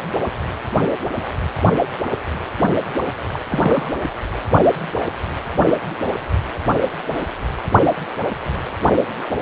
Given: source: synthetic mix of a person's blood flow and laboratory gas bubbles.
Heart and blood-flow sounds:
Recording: Doppler ultrasound of blood flow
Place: precordium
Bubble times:
3.27-3.39 s: bubbles
3.49-3.90 s: bubbles
From the record:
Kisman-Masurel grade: 112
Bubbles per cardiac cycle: 1 to 2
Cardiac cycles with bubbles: 1 to 10%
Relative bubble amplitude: moderate (0.250 to 0.450)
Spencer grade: 1 (occasional bubble signal discernible with the cardiac motion signal, with majority of cardiac periods free of bubbles)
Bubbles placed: only in the low amplitude regions of the cardiac cycle

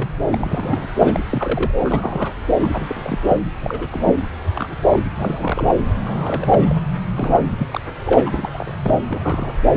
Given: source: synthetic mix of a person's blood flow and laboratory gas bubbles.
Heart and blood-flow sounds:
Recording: Doppler ultrasound of blood flow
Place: subclavian vein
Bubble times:
0.00-0.08 s: bubbles
0.31-0.88 s: bubbles
0.99-1.20 s: bubbles
1.29-1.72 s: bubbles
1.79-2.33 s: bubbles
2.60-3.19 s: bubbles
3.27-3.36 s: bubbles
3.60-3.88 s: bubbles
3.92-4.26 s: bubbles
4.55-4.77 s: bubbles
4.89-5.00 s: bubbles
5.14-5.75 s: bubbles
6.04-6.75 s: bubbles
7.14-7.45 s: bubbles
7.59-7.80 s: bubbles
8.05-8.50 s: bubbles
8.54-8.75 s: bubbles
8.83-8.99 s: bubbles
9.07-9.54 s: bubbles
9.73-9.77 s: bubbles
From the record:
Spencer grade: 3 (all of the cardiac periods contain showers or single bubble signals, but not dominating or overriding the cardiac motion signals)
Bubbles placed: anywhere in the cardiac cycle

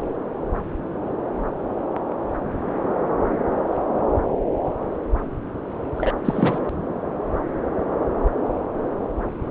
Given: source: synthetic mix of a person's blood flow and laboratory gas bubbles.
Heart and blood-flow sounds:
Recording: Doppler ultrasound of blood flow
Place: subclavian vein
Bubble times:
5.96-6.14 s: bubbles
6.25-6.58 s: bubbles
From the record:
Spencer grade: 1 (occasional bubble signal discernible with the cardiac motion signal, with majority of cardiac periods free of bubbles)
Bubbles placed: anywhere in the cardiac cycle

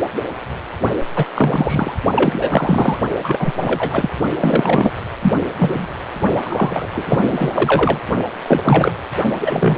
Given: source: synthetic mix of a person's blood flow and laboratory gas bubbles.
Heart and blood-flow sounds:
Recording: Doppler ultrasound of blood flow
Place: precordium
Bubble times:
1.16-1.25 s: bubbles
1.35-1.95 s: bubbles
2.15-2.98 s: bubbles
3.23-3.52 s: bubbles
3.57-4.09 s: bubbles
4.40-4.91 s: bubbles
5.21-5.32 s: bubbles
5.59-5.87 s: bubbles
6.42-6.86 s: bubbles
6.93-8.00 s: bubbles
8.47-8.91 s: bubbles
9.40-9.78 s: bubbles
From the record:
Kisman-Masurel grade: 333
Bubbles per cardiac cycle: rolling drumbeat, 9 or more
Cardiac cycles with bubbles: 50 to 99%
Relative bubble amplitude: loud (0.450 to 0.775)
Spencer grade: 3 (all of the cardiac periods contain showers or single bubble signals, but not dominating or overriding the cardiac motion signals)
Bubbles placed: only in the low amplitude regions of the cardiac cycle

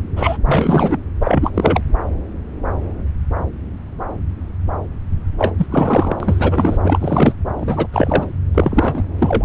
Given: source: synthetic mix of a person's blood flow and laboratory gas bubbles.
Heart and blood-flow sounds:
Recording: Doppler ultrasound of blood flow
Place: subclavian vein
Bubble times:
0.16-0.37 s: bubbles
0.45-0.97 s: bubbles
1.20-1.51 s: bubbles
1.54-1.81 s: bubbles
5.38-5.53 s: bubbles
5.58-5.66 s: bubbles
5.71-6.77 s: bubbles
6.83-7.35 s: bubbles
7.57-7.87 s: bubbles
7.92-8.28 s: bubbles
8.54-9.04 s: bubbles
9.18-9.45 s: bubbles
From the record:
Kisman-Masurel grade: 333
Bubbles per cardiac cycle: rolling drumbeat, 9 or more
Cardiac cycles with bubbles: 50 to 99%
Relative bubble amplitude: loud (0.450 to 0.775)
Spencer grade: 3 (all of the cardiac periods contain showers or single bubble signals, but not dominating or overriding the cardiac motion signals)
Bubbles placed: anywhere in the cardiac cycle

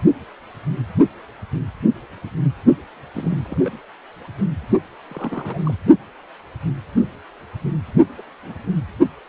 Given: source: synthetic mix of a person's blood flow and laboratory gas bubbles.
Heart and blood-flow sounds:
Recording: Doppler ultrasound of blood flow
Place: precordium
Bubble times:
3.12-3.40 s: bubbles
3.44-3.79 s: bubbles
5.11-5.74 s: bubbles
8.18-8.21 s: bubbles
8.43-8.54 s: bubbles
8.63-8.71 s: bubbles
From the record:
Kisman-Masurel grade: 221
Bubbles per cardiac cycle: several, 3 to 8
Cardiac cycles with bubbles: 10 to 50%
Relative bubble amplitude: barely perceptible (0.100 to 0.250)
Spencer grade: 2 (many but less than half of the cardiac periods contain bubble signals, singularly or in groups)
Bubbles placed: only in the low amplitude regions of the cardiac cycle

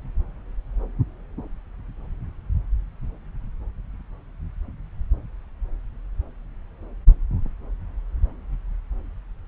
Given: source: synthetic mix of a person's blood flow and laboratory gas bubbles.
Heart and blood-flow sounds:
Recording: Doppler ultrasound of blood flow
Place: subclavian vein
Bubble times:
no bubbles
From the record:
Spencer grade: 0 (complete lack of bubble signals)

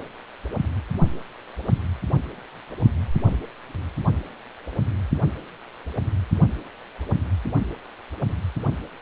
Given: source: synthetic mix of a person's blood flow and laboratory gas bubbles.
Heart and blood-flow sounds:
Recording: Doppler ultrasound of blood flow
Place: precordium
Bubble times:
no bubbles
From the record:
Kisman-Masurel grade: 000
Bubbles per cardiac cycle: 0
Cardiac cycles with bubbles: 0%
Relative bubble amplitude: no bubbles discernible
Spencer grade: 0 (complete lack of bubble signals)

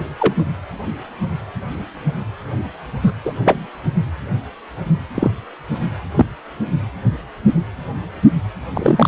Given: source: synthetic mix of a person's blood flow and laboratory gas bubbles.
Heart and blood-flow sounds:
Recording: Doppler ultrasound of blood flow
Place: precordium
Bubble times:
0.00-0.03 s: bubbles
0.20-0.34 s: bubbles
3.02-3.11 s: bubbles
3.24-3.32 s: bubbles
3.44-3.66 s: bubbles
5.15-5.31 s: bubbles
6.16-6.25 s: bubbles
8.73-9.08 s: bubbles
From the record:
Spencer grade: 2 (many but less than half of the cardiac periods contain bubble signals, singularly or in groups)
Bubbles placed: anywhere in the cardiac cycle

